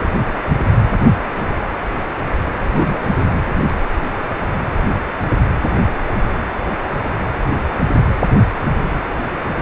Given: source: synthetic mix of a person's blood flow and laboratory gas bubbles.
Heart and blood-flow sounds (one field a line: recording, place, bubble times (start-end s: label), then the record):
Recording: Doppler ultrasound of blood flow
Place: precordium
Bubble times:
2.72-3.23 s: bubbles
From the record:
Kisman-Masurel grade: 112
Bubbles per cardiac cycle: 1 to 2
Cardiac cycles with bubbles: 1 to 10%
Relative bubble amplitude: moderate (0.250 to 0.450)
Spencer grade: 1 (occasional bubble signal discernible with the cardiac motion signal, with majority of cardiac periods free of bubbles)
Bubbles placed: anywhere in the cardiac cycle